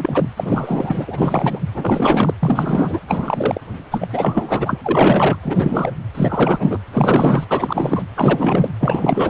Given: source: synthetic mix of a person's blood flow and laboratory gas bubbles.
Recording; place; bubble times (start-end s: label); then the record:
Doppler ultrasound of blood flow; precordium
0.00-0.31 s: bubbles
0.37-1.60 s: bubbles
1.73-2.34 s: bubbles
2.42-3.00 s: bubbles
3.08-3.60 s: bubbles
3.91-4.08 s: bubbles
4.12-4.79 s: bubbles
4.83-5.39 s: bubbles
5.42-5.92 s: bubbles
6.14-6.79 s: bubbles
6.92-7.45 s: bubbles
7.49-8.03 s: bubbles
8.15-8.70 s: bubbles
8.80-9.30 s: bubbles
From the record:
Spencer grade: 4 (maximum detectable bubble signal sounding continuously throughout systole and diastole of every cardiac period, and overriding the amplitude of the normal cardiac signals); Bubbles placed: anywhere in the cardiac cycle